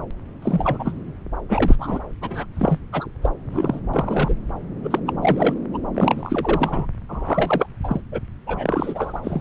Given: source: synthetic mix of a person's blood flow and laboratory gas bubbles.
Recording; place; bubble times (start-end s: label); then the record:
Doppler ultrasound of blood flow; subclavian vein
0.42-0.93 s: bubbles
1.49-1.76 s: bubbles
1.79-1.99 s: bubbles
2.21-2.46 s: bubbles
2.56-2.80 s: bubbles
2.92-3.08 s: bubbles
3.23-3.29 s: bubbles
3.52-3.79 s: bubbles
3.93-4.34 s: bubbles
4.83-5.00 s: bubbles
5.07-5.12 s: bubbles
5.22-5.58 s: bubbles
5.74-5.78 s: bubbles
5.94-6.87 s: bubbles
7.09-7.67 s: bubbles
7.83-8.00 s: bubbles
8.11-8.20 s: bubbles
8.46-9.18 s: bubbles
9.23-9.41 s: bubbles
From the record:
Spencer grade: 3 (all of the cardiac periods contain showers or single bubble signals, but not dominating or overriding the cardiac motion signals); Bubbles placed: anywhere in the cardiac cycle